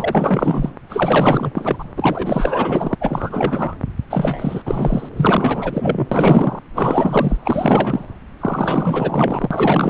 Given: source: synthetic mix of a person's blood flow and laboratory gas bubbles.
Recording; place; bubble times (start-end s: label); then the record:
Doppler ultrasound of blood flow; subclavian vein
0.00-0.72 s: bubbles
0.89-1.51 s: bubbles
1.54-1.84 s: bubbles
1.96-2.94 s: bubbles
3.00-3.75 s: bubbles
4.10-4.62 s: bubbles
4.66-5.09 s: bubbles
5.17-6.08 s: bubbles
6.12-6.59 s: bubbles
6.74-7.37 s: bubbles
7.44-8.05 s: bubbles
8.40-9.90 s: bubbles
From the record:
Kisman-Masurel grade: 444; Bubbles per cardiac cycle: continuous sound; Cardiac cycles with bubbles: 100%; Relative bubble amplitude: maximal (0.775 to 0.999); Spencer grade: 4 (maximum detectable bubble signal sounding continuously throughout systole and diastole of every cardiac period, and overriding the amplitude of the normal cardiac signals); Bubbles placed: anywhere in the cardiac cycle